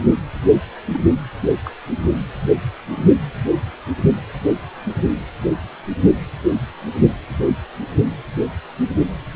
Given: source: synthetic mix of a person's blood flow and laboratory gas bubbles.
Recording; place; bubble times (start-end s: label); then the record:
Doppler ultrasound of blood flow; precordium
0.53-0.59 s: bubbles
0.91-1.01 s: bubbles
1.65-1.71 s: bubbles
2.04-2.19 s: bubbles
2.96-3.05 s: bubbles
From the record:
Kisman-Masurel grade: 121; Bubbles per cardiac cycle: 1 to 2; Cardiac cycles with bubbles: 10 to 50%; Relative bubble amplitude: barely perceptible (0.100 to 0.250); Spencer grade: 2 (many but less than half of the cardiac periods contain bubble signals, singularly or in groups); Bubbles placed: anywhere in the cardiac cycle